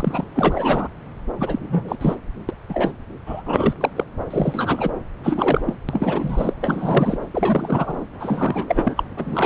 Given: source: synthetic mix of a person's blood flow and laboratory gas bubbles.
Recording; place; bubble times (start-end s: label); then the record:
Doppler ultrasound of blood flow; subclavian vein
0.00-0.29 s: bubbles
0.35-0.88 s: bubbles
1.37-1.96 s: bubbles
2.00-2.16 s: bubbles
2.48-2.54 s: bubbles
2.69-2.92 s: bubbles
3.26-3.42 s: bubbles
3.46-3.75 s: bubbles
3.80-3.91 s: bubbles
3.95-4.04 s: bubbles
4.30-4.91 s: bubbles
5.24-5.75 s: bubbles
5.88-6.54 s: bubbles
6.61-7.18 s: bubbles
7.34-8.05 s: bubbles
8.20-9.03 s: bubbles
9.16-9.46 s: bubbles
From the record:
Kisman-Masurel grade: 342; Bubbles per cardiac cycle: rolling drumbeat, 9 or more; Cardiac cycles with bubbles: 100%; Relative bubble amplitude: moderate (0.250 to 0.450); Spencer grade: 3 (all of the cardiac periods contain showers or single bubble signals, but not dominating or overriding the cardiac motion signals); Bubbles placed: anywhere in the cardiac cycle